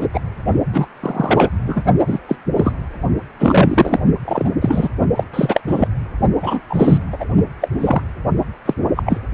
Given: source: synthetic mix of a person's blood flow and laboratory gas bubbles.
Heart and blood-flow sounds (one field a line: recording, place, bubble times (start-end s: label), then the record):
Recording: Doppler ultrasound of blood flow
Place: precordium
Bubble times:
0.00-0.07 s: bubbles
0.12-0.21 s: bubbles
0.73-0.86 s: bubbles
1.00-1.50 s: bubbles
1.67-1.83 s: bubbles
2.06-2.19 s: bubbles
2.28-2.35 s: bubbles
2.56-2.72 s: bubbles
3.40-3.99 s: bubbles
4.24-4.50 s: bubbles
4.60-4.89 s: bubbles
5.15-5.23 s: bubbles
5.33-5.61 s: bubbles
5.67-5.88 s: bubbles
6.42-6.60 s: bubbles
6.69-7.00 s: bubbles
7.11-7.17 s: bubbles
7.19-7.25 s: bubbles
7.61-7.69 s: bubbles
7.78-8.02 s: bubbles
8.66-8.74 s: bubbles
8.96-9.04 s: bubbles
9.06-9.20 s: bubbles
From the record:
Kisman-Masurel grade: 243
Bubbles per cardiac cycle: several, 3 to 8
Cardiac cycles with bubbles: 100%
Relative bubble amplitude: loud (0.450 to 0.775)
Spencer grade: 3 (all of the cardiac periods contain showers or single bubble signals, but not dominating or overriding the cardiac motion signals)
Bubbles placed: only in the low amplitude regions of the cardiac cycle